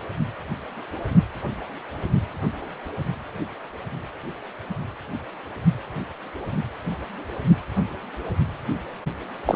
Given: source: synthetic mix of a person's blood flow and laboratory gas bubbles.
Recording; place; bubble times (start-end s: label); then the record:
Doppler ultrasound of blood flow; precordium
9.45-9.56 s: bubbles
From the record:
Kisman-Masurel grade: 213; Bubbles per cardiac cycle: several, 3 to 8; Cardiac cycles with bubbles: 1 to 10%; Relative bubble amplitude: loud (0.450 to 0.775); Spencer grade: 1 (occasional bubble signal discernible with the cardiac motion signal, with majority of cardiac periods free of bubbles); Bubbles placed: anywhere in the cardiac cycle